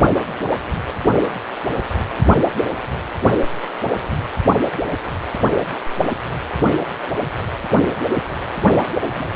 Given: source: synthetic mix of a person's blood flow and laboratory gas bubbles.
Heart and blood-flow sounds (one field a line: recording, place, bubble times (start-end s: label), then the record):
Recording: Doppler ultrasound of blood flow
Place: precordium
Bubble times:
9.09-9.29 s: bubbles
From the record:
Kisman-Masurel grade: 111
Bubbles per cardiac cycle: 1 to 2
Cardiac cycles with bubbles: 1 to 10%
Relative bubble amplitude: barely perceptible (0.100 to 0.250)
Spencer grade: 1 (occasional bubble signal discernible with the cardiac motion signal, with majority of cardiac periods free of bubbles)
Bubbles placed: only in the low amplitude regions of the cardiac cycle